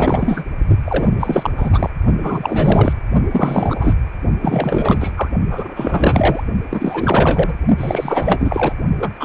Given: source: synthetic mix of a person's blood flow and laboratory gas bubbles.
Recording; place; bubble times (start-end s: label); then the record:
Doppler ultrasound of blood flow; precordium
0.00-0.45 s: bubbles
0.84-1.08 s: bubbles
1.20-1.50 s: bubbles
1.57-1.90 s: bubbles
2.23-2.93 s: bubbles
3.31-3.94 s: bubbles
4.41-5.12 s: bubbles
5.16-5.29 s: bubbles
5.51-6.44 s: bubbles
6.70-7.55 s: bubbles
7.78-8.73 s: bubbles
8.98-9.10 s: bubbles
9.20-9.25 s: bubbles
From the record:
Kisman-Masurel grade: 444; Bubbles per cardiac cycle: continuous sound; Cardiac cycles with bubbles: 100%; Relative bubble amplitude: maximal (0.775 to 0.999); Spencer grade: 4 (maximum detectable bubble signal sounding continuously throughout systole and diastole of every cardiac period, and overriding the amplitude of the normal cardiac signals); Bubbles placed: only in the low amplitude regions of the cardiac cycle